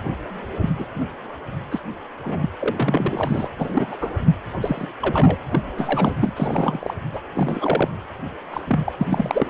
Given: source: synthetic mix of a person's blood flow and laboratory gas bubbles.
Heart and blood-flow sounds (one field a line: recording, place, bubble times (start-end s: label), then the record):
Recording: Doppler ultrasound of blood flow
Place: precordium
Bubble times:
0.61-0.70 s: bubbles
0.78-0.85 s: bubbles
1.00-1.06 s: bubbles
1.71-1.80 s: bubbles
2.22-2.49 s: bubbles
2.59-3.48 s: bubbles
3.58-3.87 s: bubbles
3.91-3.98 s: bubbles
4.00-4.10 s: bubbles
4.61-4.88 s: bubbles
5.02-5.38 s: bubbles
5.50-5.60 s: bubbles
5.74-6.12 s: bubbles
6.21-6.33 s: bubbles
6.36-6.94 s: bubbles
7.13-7.20 s: bubbles
7.36-7.89 s: bubbles
8.51-8.80 s: bubbles
8.85-8.92 s: bubbles
8.98-9.50 s: bubbles
From the record:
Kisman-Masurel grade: 242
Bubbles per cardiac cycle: several, 3 to 8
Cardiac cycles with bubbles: 100%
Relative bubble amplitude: moderate (0.250 to 0.450)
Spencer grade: 3 (all of the cardiac periods contain showers or single bubble signals, but not dominating or overriding the cardiac motion signals)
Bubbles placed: anywhere in the cardiac cycle